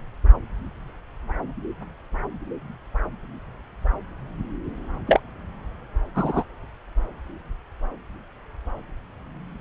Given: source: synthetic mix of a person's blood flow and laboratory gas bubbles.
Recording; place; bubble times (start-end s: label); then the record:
Doppler ultrasound of blood flow; subclavian vein
5.07-5.20 s: bubbles
6.15-6.44 s: bubbles
From the record:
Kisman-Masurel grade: 123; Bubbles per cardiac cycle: 1 to 2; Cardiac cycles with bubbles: 10 to 50%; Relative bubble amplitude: loud (0.450 to 0.775); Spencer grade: 2 (many but less than half of the cardiac periods contain bubble signals, singularly or in groups); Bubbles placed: anywhere in the cardiac cycle